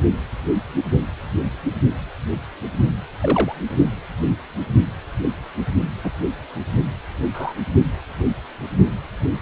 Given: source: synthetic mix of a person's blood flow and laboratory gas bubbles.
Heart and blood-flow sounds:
Doppler ultrasound of blood flow; precordium
3.21-3.55 s: bubbles
6.04-6.11 s: bubbles
7.33-7.54 s: bubbles
From the record:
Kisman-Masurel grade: 122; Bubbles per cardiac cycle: 1 to 2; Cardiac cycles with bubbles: 10 to 50%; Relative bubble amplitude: moderate (0.250 to 0.450); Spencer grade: 2 (many but less than half of the cardiac periods contain bubble signals, singularly or in groups); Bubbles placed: only in the low amplitude regions of the cardiac cycle

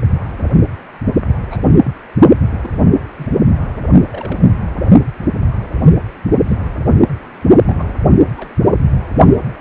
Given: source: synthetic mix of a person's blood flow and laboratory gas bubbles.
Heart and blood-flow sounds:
Doppler ultrasound of blood flow; precordium
1.50-1.57 s: bubbles
1.83-1.91 s: bubbles
2.62-2.70 s: bubbles
3.16-3.28 s: bubbles
4.12-4.40 s: bubbles
6.48-6.56 s: bubbles
6.99-7.06 s: bubbles
7.66-7.93 s: bubbles
8.37-8.54 s: bubbles
From the record:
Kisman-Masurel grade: 121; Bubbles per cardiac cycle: 1 to 2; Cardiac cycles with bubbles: 10 to 50%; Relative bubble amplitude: barely perceptible (0.100 to 0.250); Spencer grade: 2 (many but less than half of the cardiac periods contain bubble signals, singularly or in groups); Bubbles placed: only in the low amplitude regions of the cardiac cycle

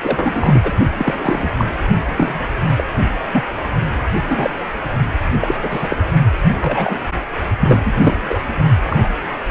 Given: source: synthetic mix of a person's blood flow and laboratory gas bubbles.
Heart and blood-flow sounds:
Doppler ultrasound of blood flow; precordium
0.02-0.71 s: bubbles
0.98-1.50 s: bubbles
1.57-1.65 s: bubbles
2.16-2.41 s: bubbles
2.76-2.84 s: bubbles
3.32-3.44 s: bubbles
4.28-4.50 s: bubbles
5.41-5.54 s: bubbles
5.62-5.96 s: bubbles
6.61-6.99 s: bubbles
7.59-7.92 s: bubbles
8.01-8.20 s: bubbles
8.29-8.38 s: bubbles
8.83-9.10 s: bubbles
From the record:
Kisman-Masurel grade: 243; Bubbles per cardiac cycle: several, 3 to 8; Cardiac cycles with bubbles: 100%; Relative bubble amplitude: loud (0.450 to 0.775); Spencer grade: 3 (all of the cardiac periods contain showers or single bubble signals, but not dominating or overriding the cardiac motion signals); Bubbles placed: only in the low amplitude regions of the cardiac cycle

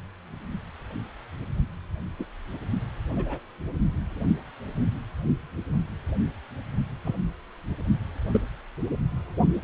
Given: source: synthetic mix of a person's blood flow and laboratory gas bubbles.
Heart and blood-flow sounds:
Doppler ultrasound of blood flow; precordium
2.19-2.25 s: bubbles
3.15-3.40 s: bubbles
7.04-7.17 s: bubbles
8.34-8.38 s: bubbles
From the record:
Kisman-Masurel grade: 121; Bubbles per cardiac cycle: 1 to 2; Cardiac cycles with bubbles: 10 to 50%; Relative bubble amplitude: barely perceptible (0.100 to 0.250); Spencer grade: 2 (many but less than half of the cardiac periods contain bubble signals, singularly or in groups); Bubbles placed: anywhere in the cardiac cycle

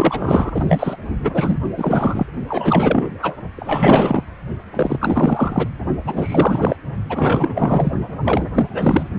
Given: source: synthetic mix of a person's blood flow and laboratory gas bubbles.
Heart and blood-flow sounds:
Doppler ultrasound of blood flow; precordium
0.00-0.51 s: bubbles
0.54-0.96 s: bubbles
1.24-1.31 s: bubbles
1.34-1.59 s: bubbles
1.76-2.27 s: bubbles
2.48-3.10 s: bubbles
3.21-3.36 s: bubbles
3.56-4.24 s: bubbles
4.73-5.69 s: bubbles
6.05-6.76 s: bubbles
7.09-7.91 s: bubbles
8.23-8.51 s: bubbles
8.54-8.69 s: bubbles
8.73-9.09 s: bubbles
From the record:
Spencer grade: 4 (maximum detectable bubble signal sounding continuously throughout systole and diastole of every cardiac period, and overriding the amplitude of the normal cardiac signals); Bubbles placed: only in the low amplitude regions of the cardiac cycle

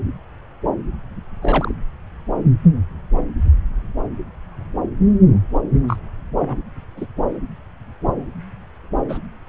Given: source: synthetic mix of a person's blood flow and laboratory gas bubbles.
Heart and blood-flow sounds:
Doppler ultrasound of blood flow; subclavian vein
1.42-1.73 s: bubbles
5.88-5.96 s: bubbles
6.38-6.56 s: bubbles
6.97-7.06 s: bubbles
9.09-9.18 s: bubbles
From the record:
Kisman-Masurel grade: 122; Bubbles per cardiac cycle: 1 to 2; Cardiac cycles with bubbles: 10 to 50%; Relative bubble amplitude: moderate (0.250 to 0.450); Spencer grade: 2 (many but less than half of the cardiac periods contain bubble signals, singularly or in groups); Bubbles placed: anywhere in the cardiac cycle

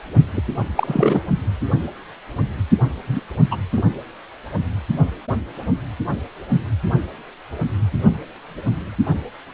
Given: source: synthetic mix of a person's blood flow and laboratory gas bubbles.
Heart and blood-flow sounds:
Doppler ultrasound of blood flow; precordium
0.34-0.41 s: bubbles
0.75-1.20 s: bubbles
3.07-3.20 s: bubbles
3.51-3.57 s: bubbles
3.73-3.82 s: bubbles
From the record:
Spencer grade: 2 (many but less than half of the cardiac periods contain bubble signals, singularly or in groups); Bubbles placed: only in the low amplitude regions of the cardiac cycle

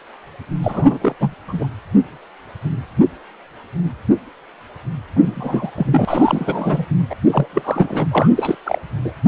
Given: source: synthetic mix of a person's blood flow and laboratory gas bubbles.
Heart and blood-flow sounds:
Doppler ultrasound of blood flow; precordium
0.62-1.16 s: bubbles
1.19-1.34 s: bubbles
1.47-1.67 s: bubbles
5.15-5.21 s: bubbles
5.26-5.71 s: bubbles
5.76-6.86 s: bubbles
7.10-7.15 s: bubbles
7.28-7.46 s: bubbles
7.50-8.07 s: bubbles
8.11-8.30 s: bubbles
8.37-8.55 s: bubbles
8.65-8.80 s: bubbles
9.04-9.12 s: bubbles
From the record:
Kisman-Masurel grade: 333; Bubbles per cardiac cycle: rolling drumbeat, 9 or more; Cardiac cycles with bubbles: 50 to 99%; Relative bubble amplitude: loud (0.450 to 0.775); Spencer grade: 3 (all of the cardiac periods contain showers or single bubble signals, but not dominating or overriding the cardiac motion signals); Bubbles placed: anywhere in the cardiac cycle

